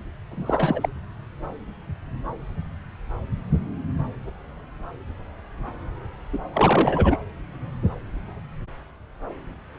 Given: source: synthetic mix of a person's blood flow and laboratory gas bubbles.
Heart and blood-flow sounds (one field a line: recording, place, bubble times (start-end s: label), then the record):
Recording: Doppler ultrasound of blood flow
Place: subclavian vein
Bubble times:
0.31-0.89 s: bubbles
6.33-6.38 s: bubbles
6.54-7.17 s: bubbles
From the record:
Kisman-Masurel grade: 222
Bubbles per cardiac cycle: several, 3 to 8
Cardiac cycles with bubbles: 10 to 50%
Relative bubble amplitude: moderate (0.250 to 0.450)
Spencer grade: 2 (many but less than half of the cardiac periods contain bubble signals, singularly or in groups)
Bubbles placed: anywhere in the cardiac cycle